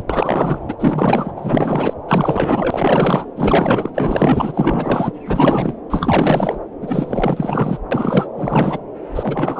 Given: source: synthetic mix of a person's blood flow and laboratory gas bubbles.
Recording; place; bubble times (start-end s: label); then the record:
Doppler ultrasound of blood flow; subclavian vein
0.00-0.03 s: bubbles
0.10-0.58 s: bubbles
0.68-0.74 s: bubbles
0.79-1.33 s: bubbles
1.36-1.94 s: bubbles
2.08-3.26 s: bubbles
3.36-3.90 s: bubbles
3.94-5.12 s: bubbles
5.25-5.73 s: bubbles
5.90-6.58 s: bubbles
6.81-7.78 s: bubbles
7.91-8.27 s: bubbles
8.36-8.79 s: bubbles
9.15-9.60 s: bubbles
From the record:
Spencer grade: 4 (maximum detectable bubble signal sounding continuously throughout systole and diastole of every cardiac period, and overriding the amplitude of the normal cardiac signals); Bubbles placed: anywhere in the cardiac cycle